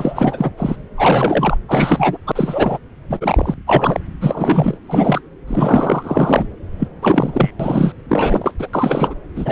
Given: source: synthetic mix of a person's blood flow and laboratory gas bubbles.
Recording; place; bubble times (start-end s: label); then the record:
Doppler ultrasound of blood flow; subclavian vein
0.00-0.50 s: bubbles
0.57-0.77 s: bubbles
0.97-1.58 s: bubbles
1.67-2.17 s: bubbles
2.26-2.32 s: bubbles
2.35-2.79 s: bubbles
3.10-3.18 s: bubbles
3.21-3.54 s: bubbles
3.67-4.00 s: bubbles
4.21-4.77 s: bubbles
4.88-5.21 s: bubbles
5.47-6.47 s: bubbles
6.79-6.88 s: bubbles
7.02-7.51 s: bubbles
7.59-7.93 s: bubbles
8.08-8.52 s: bubbles
8.58-8.67 s: bubbles
8.73-9.14 s: bubbles
9.35-9.52 s: bubbles
From the record:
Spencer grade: 3 (all of the cardiac periods contain showers or single bubble signals, but not dominating or overriding the cardiac motion signals); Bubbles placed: anywhere in the cardiac cycle